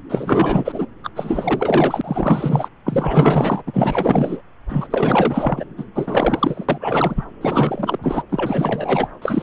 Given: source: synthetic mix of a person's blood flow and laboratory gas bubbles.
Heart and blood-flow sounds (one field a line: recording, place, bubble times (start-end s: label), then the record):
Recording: Doppler ultrasound of blood flow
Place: subclavian vein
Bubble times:
0.09-0.86 s: bubbles
1.04-1.10 s: bubbles
1.15-2.69 s: bubbles
2.85-3.62 s: bubbles
3.66-4.42 s: bubbles
4.69-4.88 s: bubbles
4.90-5.65 s: bubbles
5.77-5.85 s: bubbles
5.95-6.66 s: bubbles
6.69-7.24 s: bubbles
7.41-7.99 s: bubbles
8.02-8.22 s: bubbles
8.29-9.09 s: bubbles
9.21-9.43 s: bubbles
From the record:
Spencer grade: 4 (maximum detectable bubble signal sounding continuously throughout systole and diastole of every cardiac period, and overriding the amplitude of the normal cardiac signals)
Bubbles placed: anywhere in the cardiac cycle